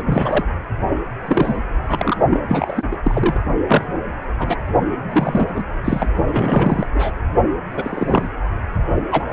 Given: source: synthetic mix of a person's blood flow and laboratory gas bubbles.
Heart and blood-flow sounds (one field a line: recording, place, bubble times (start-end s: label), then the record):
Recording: Doppler ultrasound of blood flow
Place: precordium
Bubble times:
0.05-0.44 s: bubbles
1.25-1.56 s: bubbles
1.86-2.17 s: bubbles
2.30-2.40 s: bubbles
2.48-2.83 s: bubbles
2.91-2.97 s: bubbles
3.03-3.41 s: bubbles
3.68-3.87 s: bubbles
4.39-4.56 s: bubbles
5.11-5.49 s: bubbles
5.54-5.64 s: bubbles
5.84-6.10 s: bubbles
6.27-6.87 s: bubbles
6.94-7.12 s: bubbles
7.76-8.28 s: bubbles
9.11-9.24 s: bubbles
9.29-9.32 s: bubbles
From the record:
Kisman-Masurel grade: 243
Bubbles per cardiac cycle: several, 3 to 8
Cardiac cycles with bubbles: 100%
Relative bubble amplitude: loud (0.450 to 0.775)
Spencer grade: 3 (all of the cardiac periods contain showers or single bubble signals, but not dominating or overriding the cardiac motion signals)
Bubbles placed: only in the low amplitude regions of the cardiac cycle